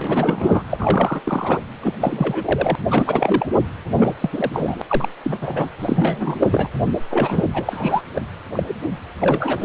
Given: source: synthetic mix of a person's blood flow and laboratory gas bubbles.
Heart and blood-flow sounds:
Doppler ultrasound of blood flow; precordium
0.00-0.62 s: bubbles
0.70-1.21 s: bubbles
1.23-1.60 s: bubbles
1.83-1.94 s: bubbles
2.00-2.75 s: bubbles
2.91-3.48 s: bubbles
3.89-4.16 s: bubbles
4.19-4.29 s: bubbles
4.33-4.82 s: bubbles
4.88-5.08 s: bubbles
5.24-5.38 s: bubbles
5.42-5.69 s: bubbles
5.79-6.36 s: bubbles
6.38-6.69 s: bubbles
7.10-7.44 s: bubbles
7.53-8.02 s: bubbles
8.15-8.21 s: bubbles
8.52-8.63 s: bubbles
8.67-8.73 s: bubbles
9.21-9.65 s: bubbles
From the record:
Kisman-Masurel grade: 342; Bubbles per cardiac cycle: rolling drumbeat, 9 or more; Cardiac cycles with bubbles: 100%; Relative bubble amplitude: moderate (0.250 to 0.450); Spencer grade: 3 (all of the cardiac periods contain showers or single bubble signals, but not dominating or overriding the cardiac motion signals); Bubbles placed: anywhere in the cardiac cycle

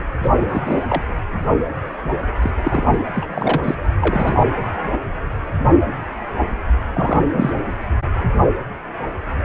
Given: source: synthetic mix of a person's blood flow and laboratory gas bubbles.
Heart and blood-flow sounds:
Doppler ultrasound of blood flow; precordium
0.20-0.30 s: bubbles
0.40-0.84 s: bubbles
0.90-1.02 s: bubbles
2.42-2.50 s: bubbles
2.64-2.98 s: bubbles
3.13-3.27 s: bubbles
3.30-3.75 s: bubbles
4.01-4.47 s: bubbles
6.94-7.22 s: bubbles
7.33-7.57 s: bubbles
From the record:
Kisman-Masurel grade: 232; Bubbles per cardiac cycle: several, 3 to 8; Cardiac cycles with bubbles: 50 to 99%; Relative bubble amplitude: moderate (0.250 to 0.450); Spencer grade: 3 (all of the cardiac periods contain showers or single bubble signals, but not dominating or overriding the cardiac motion signals); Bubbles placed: anywhere in the cardiac cycle

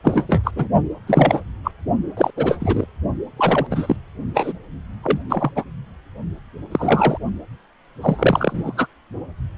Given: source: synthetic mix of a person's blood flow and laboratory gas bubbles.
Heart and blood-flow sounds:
Doppler ultrasound of blood flow; precordium
0.04-0.25 s: bubbles
0.28-0.51 s: bubbles
0.55-0.68 s: bubbles
1.06-1.41 s: bubbles
1.64-1.71 s: bubbles
2.17-2.31 s: bubbles
2.36-2.86 s: bubbles
3.36-3.67 s: bubbles
3.71-3.96 s: bubbles
4.33-4.53 s: bubbles
5.04-5.19 s: bubbles
5.29-5.51 s: bubbles
5.56-5.63 s: bubbles
6.71-7.17 s: bubbles
8.01-8.86 s: bubbles
From the record:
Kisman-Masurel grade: 243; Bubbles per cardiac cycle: several, 3 to 8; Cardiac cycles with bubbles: 100%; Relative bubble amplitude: loud (0.450 to 0.775); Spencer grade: 3 (all of the cardiac periods contain showers or single bubble signals, but not dominating or overriding the cardiac motion signals); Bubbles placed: only in the low amplitude regions of the cardiac cycle

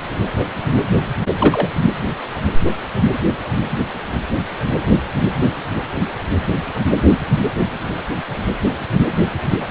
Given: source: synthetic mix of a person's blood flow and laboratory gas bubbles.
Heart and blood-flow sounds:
Doppler ultrasound of blood flow; precordium
1.39-1.69 s: bubbles
From the record:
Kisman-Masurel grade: 113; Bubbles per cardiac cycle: 1 to 2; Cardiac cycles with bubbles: 1 to 10%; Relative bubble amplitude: loud (0.450 to 0.775); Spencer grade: 1 (occasional bubble signal discernible with the cardiac motion signal, with majority of cardiac periods free of bubbles); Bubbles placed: anywhere in the cardiac cycle

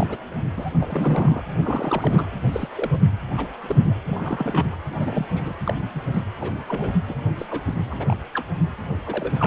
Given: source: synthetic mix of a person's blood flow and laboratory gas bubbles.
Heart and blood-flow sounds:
Doppler ultrasound of blood flow; precordium
0.00-0.17 s: bubbles
0.56-0.71 s: bubbles
0.80-1.43 s: bubbles
1.57-2.28 s: bubbles
2.52-2.69 s: bubbles
2.75-2.96 s: bubbles
3.37-3.48 s: bubbles
3.62-3.95 s: bubbles
4.06-4.75 s: bubbles
4.91-5.26 s: bubbles
5.34-5.53 s: bubbles
5.66-5.75 s: bubbles
5.94-6.01 s: bubbles
6.13-6.21 s: bubbles
6.40-6.53 s: bubbles
6.67-6.93 s: bubbles
7.08-7.14 s: bubbles
7.37-7.64 s: bubbles
7.90-8.15 s: bubbles
8.34-8.46 s: bubbles
9.03-9.32 s: bubbles
9.39-9.46 s: bubbles
From the record:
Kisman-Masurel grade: 242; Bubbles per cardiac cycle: several, 3 to 8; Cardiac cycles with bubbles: 100%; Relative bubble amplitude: moderate (0.250 to 0.450); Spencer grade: 3 (all of the cardiac periods contain showers or single bubble signals, but not dominating or overriding the cardiac motion signals); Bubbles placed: anywhere in the cardiac cycle

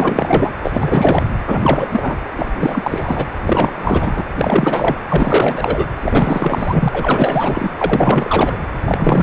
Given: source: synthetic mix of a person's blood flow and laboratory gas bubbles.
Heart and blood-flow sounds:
Doppler ultrasound of blood flow; precordium
0.00-0.52 s: bubbles
0.62-1.24 s: bubbles
1.44-2.17 s: bubbles
2.38-2.47 s: bubbles
2.55-3.26 s: bubbles
3.47-4.21 s: bubbles
4.37-5.00 s: bubbles
5.09-5.86 s: bubbles
6.01-6.88 s: bubbles
6.92-7.71 s: bubbles
7.79-8.58 s: bubbles
8.84-9.23 s: bubbles
From the record:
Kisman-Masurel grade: 444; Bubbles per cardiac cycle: continuous sound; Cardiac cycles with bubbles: 100%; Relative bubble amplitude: maximal (0.775 to 0.999); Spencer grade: 4 (maximum detectable bubble signal sounding continuously throughout systole and diastole of every cardiac period, and overriding the amplitude of the normal cardiac signals); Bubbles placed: anywhere in the cardiac cycle

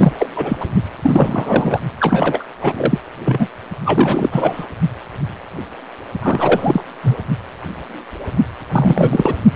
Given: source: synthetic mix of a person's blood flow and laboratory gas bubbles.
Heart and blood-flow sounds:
Doppler ultrasound of blood flow; precordium
0.00-0.12 s: bubbles
0.18-0.27 s: bubbles
0.36-0.56 s: bubbles
0.60-0.66 s: bubbles
1.02-1.80 s: bubbles
2.00-2.44 s: bubbles
2.60-3.00 s: bubbles
3.25-3.48 s: bubbles
3.85-4.67 s: bubbles
6.22-6.84 s: bubbles
7.02-7.17 s: bubbles
8.72-9.35 s: bubbles
From the record:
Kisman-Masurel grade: 333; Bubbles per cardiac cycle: rolling drumbeat, 9 or more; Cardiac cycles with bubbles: 50 to 99%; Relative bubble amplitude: loud (0.450 to 0.775); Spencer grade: 3 (all of the cardiac periods contain showers or single bubble signals, but not dominating or overriding the cardiac motion signals); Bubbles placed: only in the low amplitude regions of the cardiac cycle

